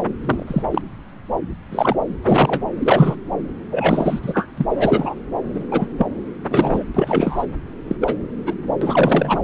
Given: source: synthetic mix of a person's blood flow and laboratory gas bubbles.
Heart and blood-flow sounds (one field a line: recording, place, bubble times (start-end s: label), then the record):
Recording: Doppler ultrasound of blood flow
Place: subclavian vein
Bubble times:
0.24-0.62 s: bubbles
0.71-0.81 s: bubbles
1.71-1.96 s: bubbles
2.23-2.61 s: bubbles
2.79-3.15 s: bubbles
3.71-4.20 s: bubbles
4.22-4.46 s: bubbles
4.58-4.66 s: bubbles
4.68-5.15 s: bubbles
5.54-5.63 s: bubbles
5.71-5.87 s: bubbles
5.97-6.07 s: bubbles
6.50-6.83 s: bubbles
6.94-7.46 s: bubbles
7.88-7.96 s: bubbles
8.01-8.15 s: bubbles
8.46-8.53 s: bubbles
8.81-9.40 s: bubbles
From the record:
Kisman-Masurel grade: 243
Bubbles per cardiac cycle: several, 3 to 8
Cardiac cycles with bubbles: 100%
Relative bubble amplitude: loud (0.450 to 0.775)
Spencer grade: 3 (all of the cardiac periods contain showers or single bubble signals, but not dominating or overriding the cardiac motion signals)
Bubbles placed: anywhere in the cardiac cycle